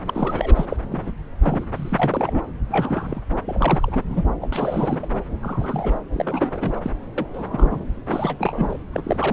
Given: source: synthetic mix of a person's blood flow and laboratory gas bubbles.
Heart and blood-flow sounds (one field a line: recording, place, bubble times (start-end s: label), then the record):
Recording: Doppler ultrasound of blood flow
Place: subclavian vein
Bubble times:
0.06-0.67 s: bubbles
0.70-0.76 s: bubbles
0.92-1.13 s: bubbles
1.43-1.67 s: bubbles
1.75-2.40 s: bubbles
2.69-3.21 s: bubbles
3.46-4.24 s: bubbles
4.41-5.08 s: bubbles
5.42-5.96 s: bubbles
6.12-6.79 s: bubbles
6.83-6.91 s: bubbles
7.17-7.26 s: bubbles
7.33-7.88 s: bubbles
8.07-8.78 s: bubbles
8.92-9.02 s: bubbles
9.04-9.33 s: bubbles
From the record:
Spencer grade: 3 (all of the cardiac periods contain showers or single bubble signals, but not dominating or overriding the cardiac motion signals)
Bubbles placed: anywhere in the cardiac cycle